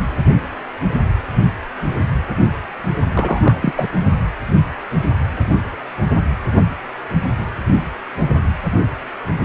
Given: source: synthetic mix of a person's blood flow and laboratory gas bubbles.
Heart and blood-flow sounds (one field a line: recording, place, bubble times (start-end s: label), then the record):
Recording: Doppler ultrasound of blood flow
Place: precordium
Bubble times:
3.13-3.59 s: bubbles
3.61-3.73 s: bubbles
3.75-3.88 s: bubbles
From the record:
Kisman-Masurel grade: 212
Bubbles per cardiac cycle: several, 3 to 8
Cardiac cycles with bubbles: 1 to 10%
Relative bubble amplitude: moderate (0.250 to 0.450)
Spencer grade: 1 (occasional bubble signal discernible with the cardiac motion signal, with majority of cardiac periods free of bubbles)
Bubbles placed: only in the low amplitude regions of the cardiac cycle